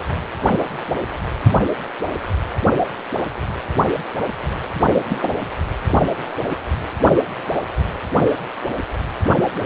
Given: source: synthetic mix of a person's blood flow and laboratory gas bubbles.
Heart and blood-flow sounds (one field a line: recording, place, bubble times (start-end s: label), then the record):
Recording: Doppler ultrasound of blood flow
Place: precordium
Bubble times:
4.73-5.18 s: bubbles
5.22-5.31 s: bubbles
From the record:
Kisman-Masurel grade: 123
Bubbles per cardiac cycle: 1 to 2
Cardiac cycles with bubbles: 10 to 50%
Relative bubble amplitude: loud (0.450 to 0.775)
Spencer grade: 2 (many but less than half of the cardiac periods contain bubble signals, singularly or in groups)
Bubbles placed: anywhere in the cardiac cycle